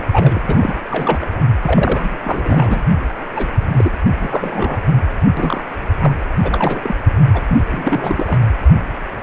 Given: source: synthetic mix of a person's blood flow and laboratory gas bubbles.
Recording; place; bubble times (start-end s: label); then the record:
Doppler ultrasound of blood flow; precordium
0.00-0.04 s: bubbles
0.12-0.40 s: bubbles
0.49-0.77 s: bubbles
0.91-1.29 s: bubbles
1.63-2.17 s: bubbles
2.24-2.85 s: bubbles
3.35-3.46 s: bubbles
3.73-3.94 s: bubbles
4.15-4.81 s: bubbles
5.37-5.64 s: bubbles
6.00-6.14 s: bubbles
6.43-6.95 s: bubbles
7.33-7.41 s: bubbles
7.48-8.38 s: bubbles
From the record:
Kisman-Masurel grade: 342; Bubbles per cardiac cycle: rolling drumbeat, 9 or more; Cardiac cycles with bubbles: 100%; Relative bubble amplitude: moderate (0.250 to 0.450); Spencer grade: 3 (all of the cardiac periods contain showers or single bubble signals, but not dominating or overriding the cardiac motion signals); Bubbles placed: anywhere in the cardiac cycle